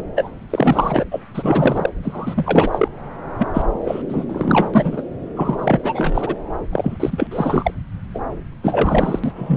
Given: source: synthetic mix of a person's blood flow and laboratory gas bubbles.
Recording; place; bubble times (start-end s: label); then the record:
Doppler ultrasound of blood flow; subclavian vein
0.00-0.03 s: bubbles
0.15-0.32 s: bubbles
0.50-1.04 s: bubbles
1.11-1.21 s: bubbles
1.34-1.90 s: bubbles
2.02-2.88 s: bubbles
3.38-3.47 s: bubbles
3.53-3.62 s: bubbles
3.84-4.02 s: bubbles
4.08-4.25 s: bubbles
4.29-4.71 s: bubbles
4.73-5.02 s: bubbles
5.35-5.80 s: bubbles
5.83-6.35 s: bubbles
6.72-7.28 s: bubbles
7.31-7.71 s: bubbles
8.14-8.20 s: bubbles
8.63-9.20 s: bubbles
9.23-9.32 s: bubbles
9.36-9.57 s: bubbles
From the record:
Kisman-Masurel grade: 343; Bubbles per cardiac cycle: rolling drumbeat, 9 or more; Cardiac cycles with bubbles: 100%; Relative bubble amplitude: loud (0.450 to 0.775); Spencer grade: 3 (all of the cardiac periods contain showers or single bubble signals, but not dominating or overriding the cardiac motion signals); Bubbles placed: anywhere in the cardiac cycle